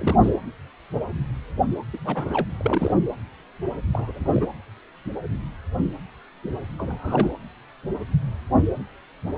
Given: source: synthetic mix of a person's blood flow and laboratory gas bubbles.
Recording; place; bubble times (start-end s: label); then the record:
Doppler ultrasound of blood flow; precordium
0.00-0.15 s: bubbles
0.23-0.33 s: bubbles
1.93-1.98 s: bubbles
2.04-2.47 s: bubbles
2.60-2.94 s: bubbles
3.94-4.47 s: bubbles
6.78-7.31 s: bubbles
From the record:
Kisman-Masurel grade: 221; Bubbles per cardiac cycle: several, 3 to 8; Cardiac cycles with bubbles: 10 to 50%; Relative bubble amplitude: barely perceptible (0.100 to 0.250); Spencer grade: 2 (many but less than half of the cardiac periods contain bubble signals, singularly or in groups); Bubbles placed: anywhere in the cardiac cycle